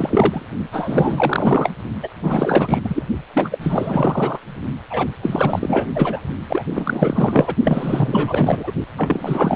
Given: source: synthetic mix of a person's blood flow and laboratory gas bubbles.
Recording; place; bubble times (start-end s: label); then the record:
Doppler ultrasound of blood flow; precordium
0.00-0.47 s: bubbles
0.71-1.71 s: bubbles
2.03-2.08 s: bubbles
2.23-2.80 s: bubbles
2.84-3.03 s: bubbles
3.33-4.38 s: bubbles
4.90-5.07 s: bubbles
5.22-5.87 s: bubbles
5.95-6.21 s: bubbles
6.48-6.66 s: bubbles
6.75-7.54 s: bubbles
7.64-8.72 s: bubbles
8.97-9.55 s: bubbles
From the record:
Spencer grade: 4 (maximum detectable bubble signal sounding continuously throughout systole and diastole of every cardiac period, and overriding the amplitude of the normal cardiac signals); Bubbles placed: only in the low amplitude regions of the cardiac cycle